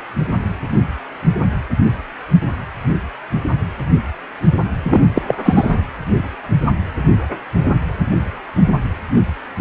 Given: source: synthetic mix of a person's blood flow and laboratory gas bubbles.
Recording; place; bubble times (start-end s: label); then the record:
Doppler ultrasound of blood flow; precordium
4.83-5.00 s: bubbles
5.14-5.21 s: bubbles
5.27-5.35 s: bubbles
5.44-5.75 s: bubbles
From the record:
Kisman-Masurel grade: 213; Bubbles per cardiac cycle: several, 3 to 8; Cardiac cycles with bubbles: 1 to 10%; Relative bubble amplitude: loud (0.450 to 0.775); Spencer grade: 1 (occasional bubble signal discernible with the cardiac motion signal, with majority of cardiac periods free of bubbles); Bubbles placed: anywhere in the cardiac cycle